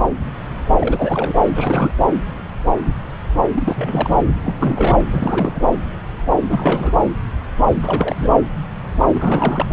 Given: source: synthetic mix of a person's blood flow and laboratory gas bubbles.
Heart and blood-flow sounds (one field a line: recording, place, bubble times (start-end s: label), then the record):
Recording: Doppler ultrasound of blood flow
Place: subclavian vein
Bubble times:
0.78-1.39 s: bubbles
1.54-1.93 s: bubbles
3.54-4.09 s: bubbles
4.44-4.54 s: bubbles
4.59-5.05 s: bubbles
5.10-5.60 s: bubbles
6.48-6.92 s: bubbles
7.82-8.37 s: bubbles
9.12-9.66 s: bubbles
From the record:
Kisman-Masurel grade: 332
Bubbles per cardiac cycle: rolling drumbeat, 9 or more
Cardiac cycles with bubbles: 50 to 99%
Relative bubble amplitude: moderate (0.250 to 0.450)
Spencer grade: 3 (all of the cardiac periods contain showers or single bubble signals, but not dominating or overriding the cardiac motion signals)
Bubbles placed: anywhere in the cardiac cycle